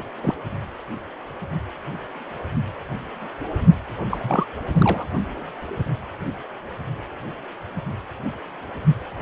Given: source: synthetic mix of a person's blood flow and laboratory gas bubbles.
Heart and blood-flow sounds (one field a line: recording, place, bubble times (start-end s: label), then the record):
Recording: Doppler ultrasound of blood flow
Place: precordium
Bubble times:
0.00-0.04 s: bubbles
0.21-0.34 s: bubbles
4.10-4.20 s: bubbles
4.23-4.45 s: bubbles
4.72-5.06 s: bubbles
From the record:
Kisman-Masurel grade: 222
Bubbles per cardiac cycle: several, 3 to 8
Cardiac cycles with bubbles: 10 to 50%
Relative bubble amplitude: moderate (0.250 to 0.450)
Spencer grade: 2 (many but less than half of the cardiac periods contain bubble signals, singularly or in groups)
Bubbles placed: anywhere in the cardiac cycle